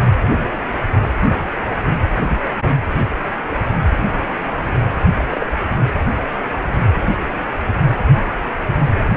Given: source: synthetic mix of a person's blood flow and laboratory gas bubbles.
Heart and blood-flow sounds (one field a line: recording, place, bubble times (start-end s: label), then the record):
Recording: Doppler ultrasound of blood flow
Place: precordium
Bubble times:
5.15-5.25 s: bubbles
5.30-5.46 s: bubbles
From the record:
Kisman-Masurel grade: 111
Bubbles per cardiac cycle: 1 to 2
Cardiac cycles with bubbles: 1 to 10%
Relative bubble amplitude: barely perceptible (0.100 to 0.250)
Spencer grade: 1 (occasional bubble signal discernible with the cardiac motion signal, with majority of cardiac periods free of bubbles)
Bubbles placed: anywhere in the cardiac cycle